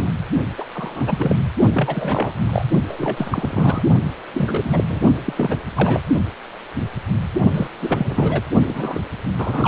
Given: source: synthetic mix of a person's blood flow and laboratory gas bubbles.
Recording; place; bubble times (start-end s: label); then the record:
Doppler ultrasound of blood flow; precordium
0.00-0.11 s: bubbles
0.58-0.65 s: bubbles
0.75-1.42 s: bubbles
1.73-2.32 s: bubbles
2.45-2.65 s: bubbles
2.88-3.82 s: bubbles
4.33-4.86 s: bubbles
4.89-5.00 s: bubbles
5.25-5.33 s: bubbles
5.37-5.57 s: bubbles
5.75-6.01 s: bubbles
7.54-7.68 s: bubbles
7.82-8.42 s: bubbles
8.66-9.00 s: bubbles
9.38-9.68 s: bubbles
From the record:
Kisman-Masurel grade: 332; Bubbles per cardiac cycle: rolling drumbeat, 9 or more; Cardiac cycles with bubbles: 50 to 99%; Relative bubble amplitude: moderate (0.250 to 0.450); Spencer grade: 3 (all of the cardiac periods contain showers or single bubble signals, but not dominating or overriding the cardiac motion signals); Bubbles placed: only in the low amplitude regions of the cardiac cycle